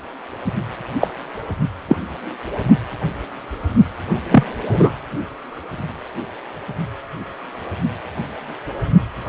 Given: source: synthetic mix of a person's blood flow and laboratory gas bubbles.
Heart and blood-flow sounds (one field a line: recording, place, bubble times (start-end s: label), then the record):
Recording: Doppler ultrasound of blood flow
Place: precordium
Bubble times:
1.01-1.08 s: bubbles
1.88-1.96 s: bubbles
4.31-4.44 s: bubbles
4.69-4.92 s: bubbles
From the record:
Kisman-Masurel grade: 123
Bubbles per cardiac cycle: 1 to 2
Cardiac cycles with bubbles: 10 to 50%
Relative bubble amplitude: loud (0.450 to 0.775)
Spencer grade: 2 (many but less than half of the cardiac periods contain bubble signals, singularly or in groups)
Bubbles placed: only in the low amplitude regions of the cardiac cycle